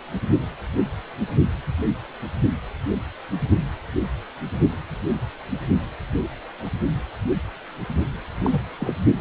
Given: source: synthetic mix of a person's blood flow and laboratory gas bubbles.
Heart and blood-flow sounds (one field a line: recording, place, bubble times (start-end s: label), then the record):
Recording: Doppler ultrasound of blood flow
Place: precordium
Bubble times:
8.43-8.62 s: bubbles
8.79-8.93 s: bubbles
From the record:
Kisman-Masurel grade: 221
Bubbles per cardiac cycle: several, 3 to 8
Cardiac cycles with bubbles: 10 to 50%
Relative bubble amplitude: barely perceptible (0.100 to 0.250)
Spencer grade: 2 (many but less than half of the cardiac periods contain bubble signals, singularly or in groups)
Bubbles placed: only in the low amplitude regions of the cardiac cycle